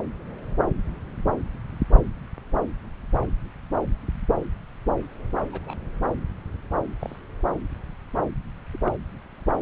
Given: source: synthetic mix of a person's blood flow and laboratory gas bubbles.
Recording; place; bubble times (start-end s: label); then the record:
Doppler ultrasound of blood flow; subclavian vein
5.52-5.78 s: bubbles
6.99-7.16 s: bubbles
8.73-8.78 s: bubbles
8.82-8.93 s: bubbles
From the record:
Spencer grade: 2 (many but less than half of the cardiac periods contain bubble signals, singularly or in groups); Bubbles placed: anywhere in the cardiac cycle